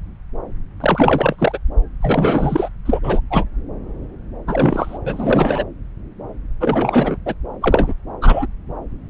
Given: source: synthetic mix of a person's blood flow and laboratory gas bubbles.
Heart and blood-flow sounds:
Doppler ultrasound of blood flow; subclavian vein
0.80-1.58 s: bubbles
2.00-2.69 s: bubbles
2.85-3.00 s: bubbles
3.03-3.21 s: bubbles
3.30-3.45 s: bubbles
4.47-4.98 s: bubbles
5.04-5.63 s: bubbles
6.60-7.17 s: bubbles
7.25-7.34 s: bubbles
7.61-7.95 s: bubbles
8.21-8.46 s: bubbles
From the record:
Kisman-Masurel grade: 333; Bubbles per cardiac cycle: rolling drumbeat, 9 or more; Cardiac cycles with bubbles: 50 to 99%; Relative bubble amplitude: loud (0.450 to 0.775); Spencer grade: 3 (all of the cardiac periods contain showers or single bubble signals, but not dominating or overriding the cardiac motion signals); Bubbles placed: anywhere in the cardiac cycle

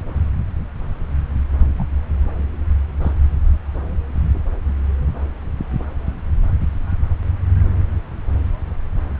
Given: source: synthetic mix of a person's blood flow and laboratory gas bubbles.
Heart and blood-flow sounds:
Doppler ultrasound of blood flow; subclavian vein
1.77-1.89 s: bubbles
3.01-3.13 s: bubbles
From the record:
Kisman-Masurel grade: 121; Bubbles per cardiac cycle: 1 to 2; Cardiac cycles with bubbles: 10 to 50%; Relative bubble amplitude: barely perceptible (0.100 to 0.250); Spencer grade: 2 (many but less than half of the cardiac periods contain bubble signals, singularly or in groups); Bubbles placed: anywhere in the cardiac cycle

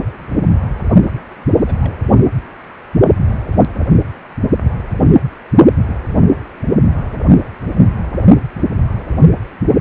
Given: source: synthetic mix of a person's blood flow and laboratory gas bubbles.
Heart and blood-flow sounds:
Doppler ultrasound of blood flow; precordium
1.66-1.74 s: bubbles
1.80-1.93 s: bubbles
From the record:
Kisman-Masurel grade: 111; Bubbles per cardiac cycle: 1 to 2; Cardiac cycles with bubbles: 1 to 10%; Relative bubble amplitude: barely perceptible (0.100 to 0.250); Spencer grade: 1 (occasional bubble signal discernible with the cardiac motion signal, with majority of cardiac periods free of bubbles); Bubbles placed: only in the low amplitude regions of the cardiac cycle

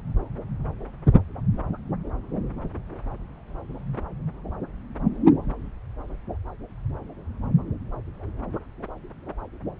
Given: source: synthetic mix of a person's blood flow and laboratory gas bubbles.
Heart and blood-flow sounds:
Doppler ultrasound of blood flow; subclavian vein
no bubbles
From the record:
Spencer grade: 0 (complete lack of bubble signals)

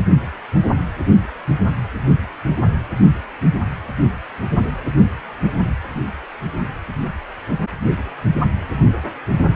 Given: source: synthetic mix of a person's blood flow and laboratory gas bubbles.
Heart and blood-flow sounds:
Doppler ultrasound of blood flow; precordium
no bubbles
From the record:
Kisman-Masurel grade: 000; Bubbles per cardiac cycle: 0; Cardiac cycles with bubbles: 0%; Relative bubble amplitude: no bubbles discernible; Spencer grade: 0 (complete lack of bubble signals)

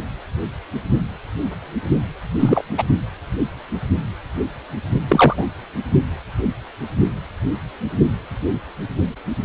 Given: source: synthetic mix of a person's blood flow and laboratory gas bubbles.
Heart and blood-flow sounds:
Doppler ultrasound of blood flow; precordium
2.40-2.62 s: bubbles
2.77-2.85 s: bubbles
5.10-5.46 s: bubbles
From the record:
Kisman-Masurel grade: 223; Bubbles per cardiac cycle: several, 3 to 8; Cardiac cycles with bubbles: 10 to 50%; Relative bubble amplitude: loud (0.450 to 0.775); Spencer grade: 2 (many but less than half of the cardiac periods contain bubble signals, singularly or in groups); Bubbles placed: only in the low amplitude regions of the cardiac cycle

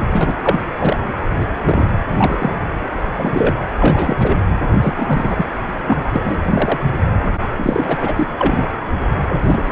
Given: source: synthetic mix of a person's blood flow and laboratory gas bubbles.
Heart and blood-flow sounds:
Doppler ultrasound of blood flow; precordium
0.00-0.02 s: bubbles
0.05-0.32 s: bubbles
0.41-0.70 s: bubbles
0.79-0.97 s: bubbles
1.41-1.47 s: bubbles
1.65-1.88 s: bubbles
2.08-2.55 s: bubbles
3.17-3.58 s: bubbles
3.80-4.16 s: bubbles
4.19-4.38 s: bubbles
4.80-5.46 s: bubbles
5.86-6.03 s: bubbles
6.12-6.38 s: bubbles
6.44-6.79 s: bubbles
7.22-7.28 s: bubbles
7.56-8.27 s: bubbles
8.38-8.66 s: bubbles
9.15-9.24 s: bubbles
9.29-9.72 s: bubbles
From the record:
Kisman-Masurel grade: 243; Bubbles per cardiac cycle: several, 3 to 8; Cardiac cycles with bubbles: 100%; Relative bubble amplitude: loud (0.450 to 0.775); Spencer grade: 3 (all of the cardiac periods contain showers or single bubble signals, but not dominating or overriding the cardiac motion signals); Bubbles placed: anywhere in the cardiac cycle

